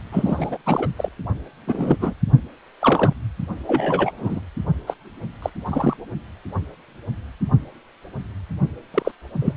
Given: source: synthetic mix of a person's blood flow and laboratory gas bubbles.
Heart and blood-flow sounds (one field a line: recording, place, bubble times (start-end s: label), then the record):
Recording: Doppler ultrasound of blood flow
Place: precordium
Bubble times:
0.11-0.57 s: bubbles
0.66-0.87 s: bubbles
0.96-1.08 s: bubbles
1.67-1.96 s: bubbles
1.99-2.13 s: bubbles
2.80-3.12 s: bubbles
3.67-4.12 s: bubbles
4.17-4.41 s: bubbles
4.87-4.94 s: bubbles
5.42-5.50 s: bubbles
5.65-5.97 s: bubbles
8.94-9.12 s: bubbles
9.41-9.54 s: bubbles
From the record:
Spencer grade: 3 (all of the cardiac periods contain showers or single bubble signals, but not dominating or overriding the cardiac motion signals)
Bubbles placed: only in the low amplitude regions of the cardiac cycle